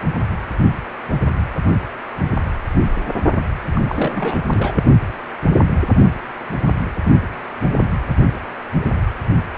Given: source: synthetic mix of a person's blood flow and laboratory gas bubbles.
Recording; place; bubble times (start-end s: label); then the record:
Doppler ultrasound of blood flow; precordium
3.74-3.82 s: bubbles
3.88-4.39 s: bubbles
4.54-4.83 s: bubbles
From the record:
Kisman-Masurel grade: 212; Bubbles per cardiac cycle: several, 3 to 8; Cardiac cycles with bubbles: 1 to 10%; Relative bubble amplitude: moderate (0.250 to 0.450); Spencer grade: 1 (occasional bubble signal discernible with the cardiac motion signal, with majority of cardiac periods free of bubbles); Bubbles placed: anywhere in the cardiac cycle